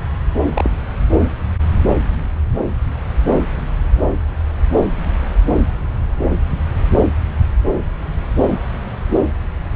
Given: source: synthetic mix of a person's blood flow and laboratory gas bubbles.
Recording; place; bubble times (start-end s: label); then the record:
Doppler ultrasound of blood flow; subclavian vein
0.54-0.70 s: bubbles
From the record:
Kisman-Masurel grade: 112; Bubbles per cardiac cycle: 1 to 2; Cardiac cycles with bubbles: 1 to 10%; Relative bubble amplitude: moderate (0.250 to 0.450); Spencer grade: 1 (occasional bubble signal discernible with the cardiac motion signal, with majority of cardiac periods free of bubbles); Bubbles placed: anywhere in the cardiac cycle